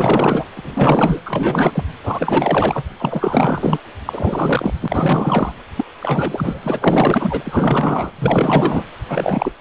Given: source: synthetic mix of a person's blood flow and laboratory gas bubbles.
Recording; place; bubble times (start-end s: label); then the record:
Doppler ultrasound of blood flow; precordium
0.00-0.51 s: bubbles
0.54-1.21 s: bubbles
1.25-1.83 s: bubbles
2.03-2.84 s: bubbles
2.98-3.77 s: bubbles
4.05-4.74 s: bubbles
4.81-5.51 s: bubbles
5.75-5.84 s: bubbles
6.00-8.11 s: bubbles
8.19-8.85 s: bubbles
9.08-9.53 s: bubbles
From the record:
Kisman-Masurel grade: 444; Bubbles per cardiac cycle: continuous sound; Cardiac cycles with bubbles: 100%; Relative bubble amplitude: maximal (0.775 to 0.999); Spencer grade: 4 (maximum detectable bubble signal sounding continuously throughout systole and diastole of every cardiac period, and overriding the amplitude of the normal cardiac signals); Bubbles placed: anywhere in the cardiac cycle